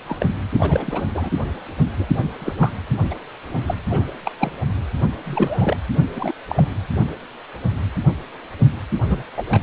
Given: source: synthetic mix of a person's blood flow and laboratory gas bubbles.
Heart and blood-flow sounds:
Doppler ultrasound of blood flow; precordium
0.06-0.16 s: bubbles
0.20-0.26 s: bubbles
0.59-1.01 s: bubbles
1.14-1.31 s: bubbles
1.98-2.06 s: bubbles
2.40-2.54 s: bubbles
2.58-2.73 s: bubbles
3.10-3.15 s: bubbles
3.55-3.60 s: bubbles
3.67-3.74 s: bubbles
3.90-4.04 s: bubbles
4.25-4.31 s: bubbles
4.38-4.52 s: bubbles
5.24-5.77 s: bubbles
5.94-6.02 s: bubbles
6.14-6.33 s: bubbles
6.48-6.68 s: bubbles
9.03-9.22 s: bubbles
9.36-9.43 s: bubbles
9.51-9.61 s: bubbles
From the record:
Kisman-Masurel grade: 232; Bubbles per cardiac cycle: several, 3 to 8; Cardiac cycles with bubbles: 50 to 99%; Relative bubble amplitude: moderate (0.250 to 0.450); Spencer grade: 3 (all of the cardiac periods contain showers or single bubble signals, but not dominating or overriding the cardiac motion signals); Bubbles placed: anywhere in the cardiac cycle

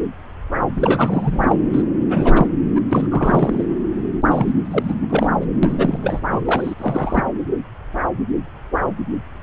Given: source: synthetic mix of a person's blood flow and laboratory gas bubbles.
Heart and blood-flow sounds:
Doppler ultrasound of blood flow; subclavian vein
0.77-1.57 s: bubbles
1.72-1.83 s: bubbles
2.06-2.47 s: bubbles
2.75-2.81 s: bubbles
2.90-3.65 s: bubbles
4.30-4.53 s: bubbles
4.63-4.93 s: bubbles
5.01-5.30 s: bubbles
5.40-5.46 s: bubbles
5.63-5.98 s: bubbles
6.02-6.41 s: bubbles
6.45-6.75 s: bubbles
6.78-7.23 s: bubbles
From the record:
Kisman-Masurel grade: 332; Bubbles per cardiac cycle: rolling drumbeat, 9 or more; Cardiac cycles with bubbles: 50 to 99%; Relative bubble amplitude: moderate (0.250 to 0.450); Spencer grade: 3 (all of the cardiac periods contain showers or single bubble signals, but not dominating or overriding the cardiac motion signals); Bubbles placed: anywhere in the cardiac cycle

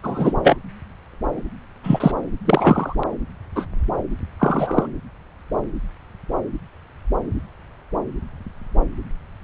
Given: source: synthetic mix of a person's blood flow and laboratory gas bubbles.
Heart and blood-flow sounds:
Doppler ultrasound of blood flow; subclavian vein
0.03-0.35 s: bubbles
0.43-0.56 s: bubbles
1.83-2.12 s: bubbles
2.45-2.96 s: bubbles
3.56-3.66 s: bubbles
4.39-4.87 s: bubbles
From the record:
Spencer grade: 2 (many but less than half of the cardiac periods contain bubble signals, singularly or in groups); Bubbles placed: anywhere in the cardiac cycle

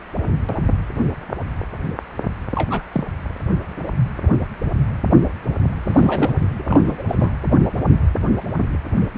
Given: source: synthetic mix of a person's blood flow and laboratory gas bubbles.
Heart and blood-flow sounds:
Doppler ultrasound of blood flow; precordium
2.55-2.81 s: bubbles
2.92-3.04 s: bubbles
5.82-6.38 s: bubbles
6.57-7.03 s: bubbles
7.08-7.30 s: bubbles
From the record:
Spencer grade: 2 (many but less than half of the cardiac periods contain bubble signals, singularly or in groups); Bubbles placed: anywhere in the cardiac cycle

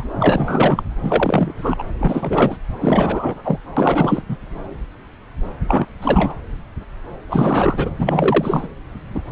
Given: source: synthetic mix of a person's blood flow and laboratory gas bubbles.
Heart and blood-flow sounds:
Doppler ultrasound of blood flow; subclavian vein
0.00-0.08 s: bubbles
0.20-0.83 s: bubbles
1.02-1.83 s: bubbles
1.99-2.58 s: bubbles
2.81-3.58 s: bubbles
3.77-4.22 s: bubbles
4.29-4.37 s: bubbles
5.68-5.86 s: bubbles
6.01-6.35 s: bubbles
7.29-7.91 s: bubbles
7.99-8.68 s: bubbles
9.14-9.21 s: bubbles
From the record:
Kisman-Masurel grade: 333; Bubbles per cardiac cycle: rolling drumbeat, 9 or more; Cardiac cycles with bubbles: 50 to 99%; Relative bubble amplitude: loud (0.450 to 0.775); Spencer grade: 3 (all of the cardiac periods contain showers or single bubble signals, but not dominating or overriding the cardiac motion signals); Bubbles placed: anywhere in the cardiac cycle

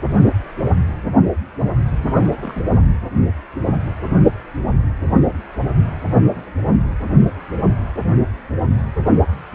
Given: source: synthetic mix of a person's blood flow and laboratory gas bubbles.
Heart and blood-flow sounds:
Doppler ultrasound of blood flow; precordium
2.18-2.61 s: bubbles
From the record:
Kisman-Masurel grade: 111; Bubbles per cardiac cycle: 1 to 2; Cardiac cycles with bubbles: 1 to 10%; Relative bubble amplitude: barely perceptible (0.100 to 0.250); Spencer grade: 1 (occasional bubble signal discernible with the cardiac motion signal, with majority of cardiac periods free of bubbles); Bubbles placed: anywhere in the cardiac cycle

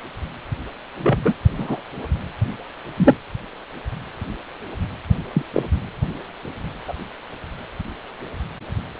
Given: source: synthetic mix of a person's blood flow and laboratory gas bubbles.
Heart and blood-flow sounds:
Doppler ultrasound of blood flow; precordium
1.02-1.18 s: bubbles
1.25-1.33 s: bubbles
1.58-1.81 s: bubbles
2.96-3.15 s: bubbles
5.33-5.42 s: bubbles
5.54-5.63 s: bubbles
6.88-6.94 s: bubbles
From the record:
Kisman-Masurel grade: 123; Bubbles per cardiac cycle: 1 to 2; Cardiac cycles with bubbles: 10 to 50%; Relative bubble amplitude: loud (0.450 to 0.775); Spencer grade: 2 (many but less than half of the cardiac periods contain bubble signals, singularly or in groups); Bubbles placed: anywhere in the cardiac cycle

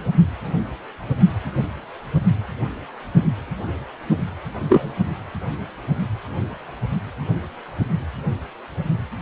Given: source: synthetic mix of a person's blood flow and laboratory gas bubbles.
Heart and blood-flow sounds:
Doppler ultrasound of blood flow; precordium
4.69-4.92 s: bubbles
From the record:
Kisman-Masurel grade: 113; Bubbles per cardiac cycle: 1 to 2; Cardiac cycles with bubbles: 1 to 10%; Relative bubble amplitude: loud (0.450 to 0.775); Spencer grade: 1 (occasional bubble signal discernible with the cardiac motion signal, with majority of cardiac periods free of bubbles); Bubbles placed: only in the low amplitude regions of the cardiac cycle

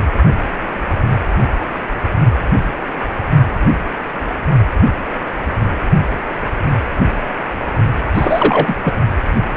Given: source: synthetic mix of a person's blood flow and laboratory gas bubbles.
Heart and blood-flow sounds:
Doppler ultrasound of blood flow; precordium
8.14-8.76 s: bubbles
8.85-8.92 s: bubbles
From the record:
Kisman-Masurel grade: 213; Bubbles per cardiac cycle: several, 3 to 8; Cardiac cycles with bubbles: 1 to 10%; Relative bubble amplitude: loud (0.450 to 0.775); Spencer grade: 1 (occasional bubble signal discernible with the cardiac motion signal, with majority of cardiac periods free of bubbles); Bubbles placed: only in the low amplitude regions of the cardiac cycle

